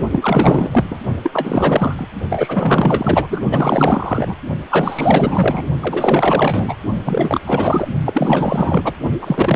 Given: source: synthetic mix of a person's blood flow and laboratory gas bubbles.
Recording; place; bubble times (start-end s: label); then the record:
Doppler ultrasound of blood flow; precordium
0.12-0.85 s: bubbles
0.90-0.98 s: bubbles
1.23-2.07 s: bubbles
2.29-3.44 s: bubbles
3.50-4.35 s: bubbles
4.70-5.67 s: bubbles
5.81-6.77 s: bubbles
7.05-7.41 s: bubbles
7.46-7.88 s: bubbles
8.05-8.94 s: bubbles
9.21-9.56 s: bubbles
From the record:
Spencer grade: 4 (maximum detectable bubble signal sounding continuously throughout systole and diastole of every cardiac period, and overriding the amplitude of the normal cardiac signals); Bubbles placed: only in the low amplitude regions of the cardiac cycle